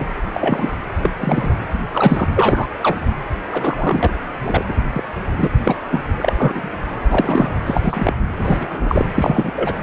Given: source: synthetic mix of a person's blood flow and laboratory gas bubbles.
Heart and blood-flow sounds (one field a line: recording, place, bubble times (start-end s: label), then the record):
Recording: Doppler ultrasound of blood flow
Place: precordium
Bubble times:
0.00-0.09 s: bubbles
0.33-0.76 s: bubbles
0.97-1.11 s: bubbles
1.20-1.54 s: bubbles
1.93-2.28 s: bubbles
2.35-2.68 s: bubbles
2.82-2.98 s: bubbles
3.52-4.13 s: bubbles
4.43-4.65 s: bubbles
4.69-4.75 s: bubbles
4.94-5.04 s: bubbles
5.38-5.49 s: bubbles
5.66-5.77 s: bubbles
5.91-6.04 s: bubbles
6.17-6.81 s: bubbles
7.08-7.58 s: bubbles
7.66-8.15 s: bubbles
8.38-9.05 s: bubbles
9.15-9.52 s: bubbles
9.55-9.73 s: bubbles
From the record:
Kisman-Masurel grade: 243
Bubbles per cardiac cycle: several, 3 to 8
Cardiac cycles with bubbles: 100%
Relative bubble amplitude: loud (0.450 to 0.775)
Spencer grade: 3 (all of the cardiac periods contain showers or single bubble signals, but not dominating or overriding the cardiac motion signals)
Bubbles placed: anywhere in the cardiac cycle